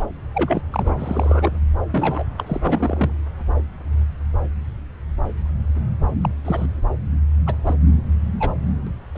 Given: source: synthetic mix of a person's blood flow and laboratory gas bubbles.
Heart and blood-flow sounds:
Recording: Doppler ultrasound of blood flow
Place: subclavian vein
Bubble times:
0.00-0.05 s: bubbles
0.35-0.61 s: bubbles
0.73-0.96 s: bubbles
0.99-1.58 s: bubbles
1.92-2.23 s: bubbles
2.38-3.14 s: bubbles
6.21-6.29 s: bubbles
6.45-6.66 s: bubbles
7.46-7.57 s: bubbles
7.66-7.75 s: bubbles
8.39-8.54 s: bubbles
8.86-8.90 s: bubbles
9.15-9.18 s: bubbles
From the record:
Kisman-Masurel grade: 232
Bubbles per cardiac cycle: several, 3 to 8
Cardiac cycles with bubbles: 50 to 99%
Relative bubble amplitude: moderate (0.250 to 0.450)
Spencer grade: 3 (all of the cardiac periods contain showers or single bubble signals, but not dominating or overriding the cardiac motion signals)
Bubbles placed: anywhere in the cardiac cycle

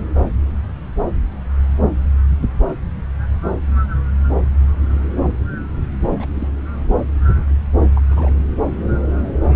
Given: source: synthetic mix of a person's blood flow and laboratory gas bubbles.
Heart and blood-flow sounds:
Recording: Doppler ultrasound of blood flow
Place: subclavian vein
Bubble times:
6.02-6.26 s: bubbles
6.34-6.48 s: bubbles
7.96-8.01 s: bubbles
8.10-8.33 s: bubbles
From the record:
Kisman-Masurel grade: 221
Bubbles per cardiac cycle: several, 3 to 8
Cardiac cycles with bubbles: 10 to 50%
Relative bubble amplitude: barely perceptible (0.100 to 0.250)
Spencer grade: 2 (many but less than half of the cardiac periods contain bubble signals, singularly or in groups)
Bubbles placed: anywhere in the cardiac cycle

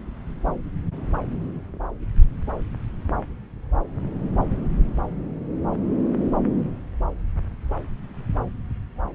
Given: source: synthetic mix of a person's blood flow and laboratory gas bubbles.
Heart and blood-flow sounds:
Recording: Doppler ultrasound of blood flow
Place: subclavian vein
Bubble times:
no bubbles
From the record:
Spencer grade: 0 (complete lack of bubble signals)

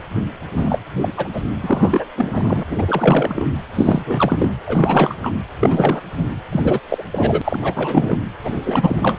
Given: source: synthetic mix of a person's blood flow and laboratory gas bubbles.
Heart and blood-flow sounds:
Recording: Doppler ultrasound of blood flow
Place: precordium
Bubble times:
0.54-0.79 s: bubbles
1.01-1.12 s: bubbles
1.17-1.28 s: bubbles
1.33-1.43 s: bubbles
1.61-2.05 s: bubbles
2.16-2.63 s: bubbles
2.68-3.47 s: bubbles
3.74-4.53 s: bubbles
4.67-5.15 s: bubbles
5.21-5.33 s: bubbles
5.60-6.01 s: bubbles
6.12-6.25 s: bubbles
6.52-6.79 s: bubbles
6.89-7.04 s: bubbles
7.12-7.42 s: bubbles
7.44-8.18 s: bubbles
8.43-9.18 s: bubbles
From the record:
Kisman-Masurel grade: 333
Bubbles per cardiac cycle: rolling drumbeat, 9 or more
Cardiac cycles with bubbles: 50 to 99%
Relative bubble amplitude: loud (0.450 to 0.775)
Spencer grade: 3 (all of the cardiac periods contain showers or single bubble signals, but not dominating or overriding the cardiac motion signals)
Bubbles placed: anywhere in the cardiac cycle

